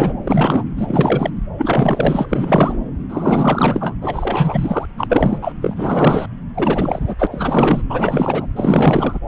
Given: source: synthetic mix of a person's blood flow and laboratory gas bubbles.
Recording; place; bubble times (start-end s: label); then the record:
Doppler ultrasound of blood flow; subclavian vein
0.00-0.14 s: bubbles
0.24-0.64 s: bubbles
0.77-1.30 s: bubbles
1.58-2.25 s: bubbles
2.29-2.78 s: bubbles
3.09-3.95 s: bubbles
4.01-4.86 s: bubbles
4.97-5.38 s: bubbles
5.41-5.53 s: bubbles
5.62-6.29 s: bubbles
6.54-7.14 s: bubbles
7.19-7.27 s: bubbles
7.31-7.82 s: bubbles
7.89-8.46 s: bubbles
8.56-9.19 s: bubbles
From the record:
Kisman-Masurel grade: 444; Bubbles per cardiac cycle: continuous sound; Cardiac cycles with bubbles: 100%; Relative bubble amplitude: maximal (0.775 to 0.999); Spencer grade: 4 (maximum detectable bubble signal sounding continuously throughout systole and diastole of every cardiac period, and overriding the amplitude of the normal cardiac signals); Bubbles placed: anywhere in the cardiac cycle